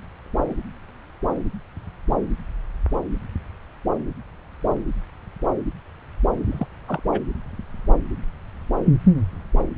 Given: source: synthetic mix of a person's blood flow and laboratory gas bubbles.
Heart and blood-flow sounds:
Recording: Doppler ultrasound of blood flow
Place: subclavian vein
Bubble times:
6.51-6.67 s: bubbles
6.88-7.00 s: bubbles
7.12-7.21 s: bubbles
From the record:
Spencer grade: 1 (occasional bubble signal discernible with the cardiac motion signal, with majority of cardiac periods free of bubbles)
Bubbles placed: anywhere in the cardiac cycle

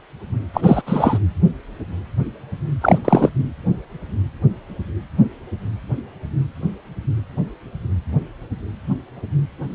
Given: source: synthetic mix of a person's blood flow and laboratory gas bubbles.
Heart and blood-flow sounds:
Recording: Doppler ultrasound of blood flow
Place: precordium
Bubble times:
0.53-0.82 s: bubbles
0.86-1.19 s: bubbles
2.81-2.99 s: bubbles
3.05-3.29 s: bubbles
From the record:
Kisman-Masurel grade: 223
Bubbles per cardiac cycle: several, 3 to 8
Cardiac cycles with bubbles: 10 to 50%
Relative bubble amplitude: loud (0.450 to 0.775)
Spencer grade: 2 (many but less than half of the cardiac periods contain bubble signals, singularly or in groups)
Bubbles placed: anywhere in the cardiac cycle

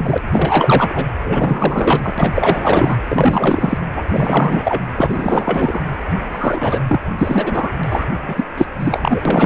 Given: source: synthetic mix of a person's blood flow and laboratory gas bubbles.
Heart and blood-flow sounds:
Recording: Doppler ultrasound of blood flow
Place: precordium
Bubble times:
0.00-0.18 s: bubbles
0.31-1.06 s: bubbles
1.24-2.15 s: bubbles
2.18-2.97 s: bubbles
3.08-3.77 s: bubbles
3.96-4.04 s: bubbles
4.08-4.85 s: bubbles
4.95-5.79 s: bubbles
6.32-6.83 s: bubbles
6.88-7.00 s: bubbles
7.18-7.70 s: bubbles
7.83-8.05 s: bubbles
8.28-8.44 s: bubbles
8.57-8.66 s: bubbles
8.79-9.20 s: bubbles
9.25-9.46 s: bubbles
From the record:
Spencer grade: 4 (maximum detectable bubble signal sounding continuously throughout systole and diastole of every cardiac period, and overriding the amplitude of the normal cardiac signals)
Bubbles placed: anywhere in the cardiac cycle

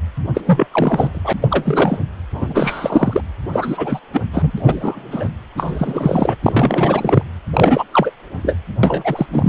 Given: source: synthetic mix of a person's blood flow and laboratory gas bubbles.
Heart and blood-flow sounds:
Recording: Doppler ultrasound of blood flow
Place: precordium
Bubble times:
0.34-0.41 s: bubbles
0.46-0.67 s: bubbles
0.72-1.33 s: bubbles
1.41-1.48 s: bubbles
1.50-2.01 s: bubbles
2.32-3.21 s: bubbles
3.52-4.00 s: bubbles
4.12-4.21 s: bubbles
4.33-4.53 s: bubbles
4.58-5.29 s: bubbles
5.56-6.35 s: bubbles
6.42-7.23 s: bubbles
7.52-7.83 s: bubbles
7.92-8.11 s: bubbles
8.43-8.56 s: bubbles
8.83-9.26 s: bubbles
9.32-9.49 s: bubbles
From the record:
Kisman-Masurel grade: 343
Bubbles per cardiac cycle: rolling drumbeat, 9 or more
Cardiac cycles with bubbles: 100%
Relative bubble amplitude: loud (0.450 to 0.775)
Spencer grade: 3 (all of the cardiac periods contain showers or single bubble signals, but not dominating or overriding the cardiac motion signals)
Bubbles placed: anywhere in the cardiac cycle

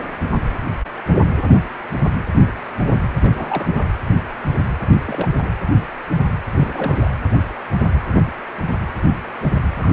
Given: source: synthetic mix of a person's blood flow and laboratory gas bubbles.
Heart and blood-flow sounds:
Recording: Doppler ultrasound of blood flow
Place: precordium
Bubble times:
3.22-3.92 s: bubbles
5.05-5.29 s: bubbles
5.32-5.50 s: bubbles
6.58-6.99 s: bubbles
7.04-7.09 s: bubbles
9.75-9.93 s: bubbles
From the record:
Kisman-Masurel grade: 221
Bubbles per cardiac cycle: several, 3 to 8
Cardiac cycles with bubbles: 10 to 50%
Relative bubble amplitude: barely perceptible (0.100 to 0.250)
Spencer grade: 2 (many but less than half of the cardiac periods contain bubble signals, singularly or in groups)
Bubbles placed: anywhere in the cardiac cycle

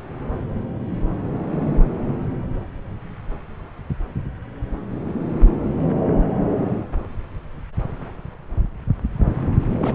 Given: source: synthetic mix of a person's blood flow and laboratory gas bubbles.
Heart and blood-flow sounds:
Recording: Doppler ultrasound of blood flow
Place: subclavian vein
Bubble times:
9.77-9.95 s: bubbles
From the record:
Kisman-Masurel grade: 112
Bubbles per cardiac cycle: 1 to 2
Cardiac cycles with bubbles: 1 to 10%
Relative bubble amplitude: moderate (0.250 to 0.450)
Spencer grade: 1 (occasional bubble signal discernible with the cardiac motion signal, with majority of cardiac periods free of bubbles)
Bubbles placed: anywhere in the cardiac cycle

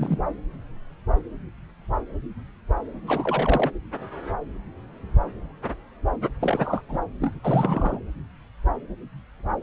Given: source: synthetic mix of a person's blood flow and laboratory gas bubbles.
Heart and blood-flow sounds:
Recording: Doppler ultrasound of blood flow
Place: subclavian vein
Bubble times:
0.00-0.20 s: bubbles
3.07-3.71 s: bubbles
6.40-6.82 s: bubbles
6.88-6.98 s: bubbles
7.21-7.34 s: bubbles
7.43-7.99 s: bubbles
From the record:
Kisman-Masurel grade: 222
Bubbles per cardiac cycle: several, 3 to 8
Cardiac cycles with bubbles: 10 to 50%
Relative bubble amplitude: moderate (0.250 to 0.450)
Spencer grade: 2 (many but less than half of the cardiac periods contain bubble signals, singularly or in groups)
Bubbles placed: anywhere in the cardiac cycle

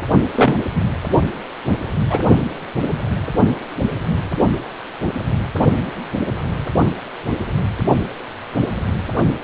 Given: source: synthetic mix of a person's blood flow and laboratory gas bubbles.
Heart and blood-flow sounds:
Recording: Doppler ultrasound of blood flow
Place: precordium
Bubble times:
0.35-0.55 s: bubbles
0.74-0.82 s: bubbles
2.10-2.19 s: bubbles
From the record:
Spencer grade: 1 (occasional bubble signal discernible with the cardiac motion signal, with majority of cardiac periods free of bubbles)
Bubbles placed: only in the low amplitude regions of the cardiac cycle

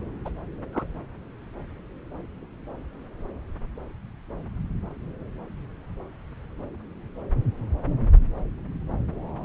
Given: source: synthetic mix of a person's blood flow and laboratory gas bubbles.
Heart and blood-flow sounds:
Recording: Doppler ultrasound of blood flow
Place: subclavian vein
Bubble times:
0.25-0.30 s: bubbles
0.72-0.83 s: bubbles
From the record:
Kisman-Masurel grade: 111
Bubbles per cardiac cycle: 1 to 2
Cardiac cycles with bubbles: 1 to 10%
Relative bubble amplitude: barely perceptible (0.100 to 0.250)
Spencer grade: 1 (occasional bubble signal discernible with the cardiac motion signal, with majority of cardiac periods free of bubbles)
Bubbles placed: anywhere in the cardiac cycle

